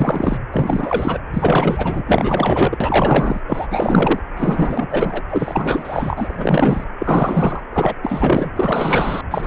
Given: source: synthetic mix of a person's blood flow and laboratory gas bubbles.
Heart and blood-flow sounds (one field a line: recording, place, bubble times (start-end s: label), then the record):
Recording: Doppler ultrasound of blood flow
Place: precordium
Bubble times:
0.00-0.38 s: bubbles
0.53-1.19 s: bubbles
1.33-2.03 s: bubbles
2.06-2.77 s: bubbles
2.80-3.41 s: bubbles
3.48-3.68 s: bubbles
3.71-4.20 s: bubbles
4.36-5.22 s: bubbles
5.29-6.84 s: bubbles
6.98-7.60 s: bubbles
7.72-7.94 s: bubbles
8.02-8.52 s: bubbles
8.55-9.21 s: bubbles
9.30-9.47 s: bubbles
From the record:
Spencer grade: 4 (maximum detectable bubble signal sounding continuously throughout systole and diastole of every cardiac period, and overriding the amplitude of the normal cardiac signals)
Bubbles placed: anywhere in the cardiac cycle